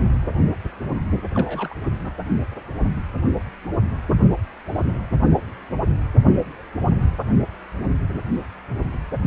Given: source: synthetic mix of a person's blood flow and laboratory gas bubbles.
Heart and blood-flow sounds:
Doppler ultrasound of blood flow; precordium
1.34-1.74 s: bubbles
2.02-2.11 s: bubbles
From the record:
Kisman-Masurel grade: 111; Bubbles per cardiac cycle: 1 to 2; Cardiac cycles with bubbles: 1 to 10%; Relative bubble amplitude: barely perceptible (0.100 to 0.250); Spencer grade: 1 (occasional bubble signal discernible with the cardiac motion signal, with majority of cardiac periods free of bubbles); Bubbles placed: anywhere in the cardiac cycle

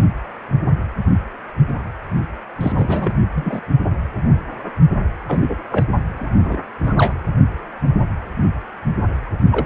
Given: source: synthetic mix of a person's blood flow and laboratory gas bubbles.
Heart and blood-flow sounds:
Doppler ultrasound of blood flow; precordium
2.60-3.17 s: bubbles
3.34-3.60 s: bubbles
5.27-5.56 s: bubbles
5.71-5.86 s: bubbles
6.17-6.58 s: bubbles
6.85-6.94 s: bubbles
6.98-7.14 s: bubbles
9.51-9.66 s: bubbles
From the record:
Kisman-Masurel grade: 222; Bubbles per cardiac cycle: several, 3 to 8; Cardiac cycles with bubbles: 10 to 50%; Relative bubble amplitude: moderate (0.250 to 0.450); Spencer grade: 2 (many but less than half of the cardiac periods contain bubble signals, singularly or in groups); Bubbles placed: only in the low amplitude regions of the cardiac cycle

